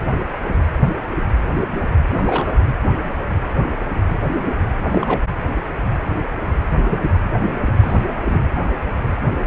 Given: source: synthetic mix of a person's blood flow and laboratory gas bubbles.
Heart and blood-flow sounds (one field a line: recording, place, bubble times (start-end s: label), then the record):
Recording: Doppler ultrasound of blood flow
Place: precordium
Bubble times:
2.06-2.54 s: bubbles
4.82-5.21 s: bubbles
6.71-6.78 s: bubbles
6.88-7.16 s: bubbles
7.66-7.73 s: bubbles
7.79-8.02 s: bubbles
8.24-8.44 s: bubbles
8.55-8.62 s: bubbles
From the record:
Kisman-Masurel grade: 222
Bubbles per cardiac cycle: several, 3 to 8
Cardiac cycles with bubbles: 10 to 50%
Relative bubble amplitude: moderate (0.250 to 0.450)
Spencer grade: 2 (many but less than half of the cardiac periods contain bubble signals, singularly or in groups)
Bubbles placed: anywhere in the cardiac cycle